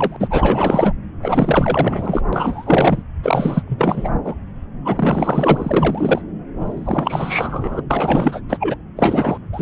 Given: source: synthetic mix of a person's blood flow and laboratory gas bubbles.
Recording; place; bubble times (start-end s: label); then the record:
Doppler ultrasound of blood flow; subclavian vein
0.00-0.17 s: bubbles
0.19-0.93 s: bubbles
1.23-2.21 s: bubbles
2.33-3.02 s: bubbles
3.23-3.63 s: bubbles
3.67-4.11 s: bubbles
4.24-4.34 s: bubbles
4.84-6.21 s: bubbles
6.60-7.82 s: bubbles
7.90-8.41 s: bubbles
8.48-8.75 s: bubbles
8.96-9.38 s: bubbles
9.52-9.62 s: bubbles
From the record:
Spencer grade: 4 (maximum detectable bubble signal sounding continuously throughout systole and diastole of every cardiac period, and overriding the amplitude of the normal cardiac signals); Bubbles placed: anywhere in the cardiac cycle